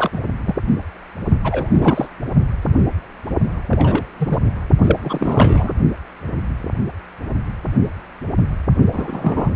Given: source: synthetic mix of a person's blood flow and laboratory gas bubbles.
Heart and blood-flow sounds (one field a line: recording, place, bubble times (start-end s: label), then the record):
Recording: Doppler ultrasound of blood flow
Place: precordium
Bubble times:
0.00-0.09 s: bubbles
0.13-0.20 s: bubbles
0.45-0.55 s: bubbles
1.44-2.07 s: bubbles
3.69-4.04 s: bubbles
4.19-4.38 s: bubbles
4.83-5.00 s: bubbles
5.02-5.75 s: bubbles
8.93-9.50 s: bubbles
From the record:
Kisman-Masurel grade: 232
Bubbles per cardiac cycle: several, 3 to 8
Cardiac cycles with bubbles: 50 to 99%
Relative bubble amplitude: moderate (0.250 to 0.450)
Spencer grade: 3 (all of the cardiac periods contain showers or single bubble signals, but not dominating or overriding the cardiac motion signals)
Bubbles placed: only in the low amplitude regions of the cardiac cycle